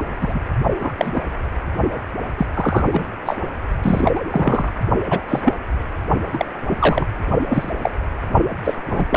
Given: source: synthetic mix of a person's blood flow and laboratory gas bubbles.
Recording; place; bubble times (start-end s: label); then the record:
Doppler ultrasound of blood flow; precordium
0.21-0.40 s: bubbles
0.80-0.93 s: bubbles
0.97-1.23 s: bubbles
2.38-2.47 s: bubbles
2.54-2.84 s: bubbles
2.92-3.10 s: bubbles
3.26-3.37 s: bubbles
3.82-4.22 s: bubbles
4.30-4.72 s: bubbles
5.10-5.21 s: bubbles
5.28-5.41 s: bubbles
5.44-5.53 s: bubbles
6.32-6.46 s: bubbles
6.70-6.76 s: bubbles
6.79-7.06 s: bubbles
7.48-7.72 s: bubbles
7.81-7.91 s: bubbles
8.64-8.74 s: bubbles
8.89-9.05 s: bubbles
9.10-9.17 s: bubbles
From the record:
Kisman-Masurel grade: 243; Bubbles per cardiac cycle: several, 3 to 8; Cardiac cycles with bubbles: 100%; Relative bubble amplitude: loud (0.450 to 0.775); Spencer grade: 3 (all of the cardiac periods contain showers or single bubble signals, but not dominating or overriding the cardiac motion signals); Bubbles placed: only in the low amplitude regions of the cardiac cycle